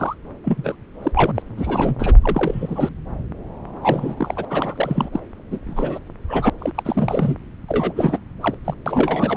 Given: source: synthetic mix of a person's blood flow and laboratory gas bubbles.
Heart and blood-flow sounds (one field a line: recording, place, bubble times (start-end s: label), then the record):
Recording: Doppler ultrasound of blood flow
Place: subclavian vein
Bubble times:
0.00-0.15 s: bubbles
0.45-0.75 s: bubbles
1.02-1.12 s: bubbles
1.15-1.31 s: bubbles
1.35-1.42 s: bubbles
1.56-1.96 s: bubbles
1.99-2.17 s: bubbles
2.22-2.90 s: bubbles
3.82-4.45 s: bubbles
4.50-5.09 s: bubbles
5.12-5.20 s: bubbles
5.50-5.59 s: bubbles
5.66-5.99 s: bubbles
6.28-6.50 s: bubbles
6.58-6.71 s: bubbles
6.75-7.36 s: bubbles
7.68-7.92 s: bubbles
7.96-8.18 s: bubbles
8.41-8.54 s: bubbles
8.65-8.74 s: bubbles
8.86-9.36 s: bubbles
From the record:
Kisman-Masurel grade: 342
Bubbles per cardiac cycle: rolling drumbeat, 9 or more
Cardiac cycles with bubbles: 100%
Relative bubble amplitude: moderate (0.250 to 0.450)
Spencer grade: 3 (all of the cardiac periods contain showers or single bubble signals, but not dominating or overriding the cardiac motion signals)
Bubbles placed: anywhere in the cardiac cycle